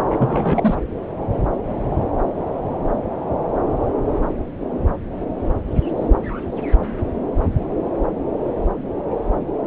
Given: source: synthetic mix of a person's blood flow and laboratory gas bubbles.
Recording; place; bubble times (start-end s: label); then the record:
Doppler ultrasound of blood flow; subclavian vein
0.10-0.75 s: bubbles
From the record:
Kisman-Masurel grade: 212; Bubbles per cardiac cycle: several, 3 to 8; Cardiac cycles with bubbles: 1 to 10%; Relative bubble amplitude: moderate (0.250 to 0.450); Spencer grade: 1 (occasional bubble signal discernible with the cardiac motion signal, with majority of cardiac periods free of bubbles); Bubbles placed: anywhere in the cardiac cycle